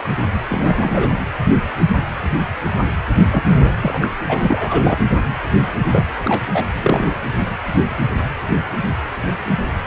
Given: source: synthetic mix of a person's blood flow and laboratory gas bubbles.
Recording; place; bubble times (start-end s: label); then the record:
Doppler ultrasound of blood flow; precordium
0.48-1.12 s: bubbles
3.31-3.74 s: bubbles
3.82-4.10 s: bubbles
4.28-4.97 s: bubbles
5.92-6.04 s: bubbles
6.24-6.41 s: bubbles
6.54-6.65 s: bubbles
6.81-7.14 s: bubbles
From the record:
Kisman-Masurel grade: 223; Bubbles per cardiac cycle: several, 3 to 8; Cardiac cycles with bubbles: 10 to 50%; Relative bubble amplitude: loud (0.450 to 0.775); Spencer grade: 2 (many but less than half of the cardiac periods contain bubble signals, singularly or in groups); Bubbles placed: anywhere in the cardiac cycle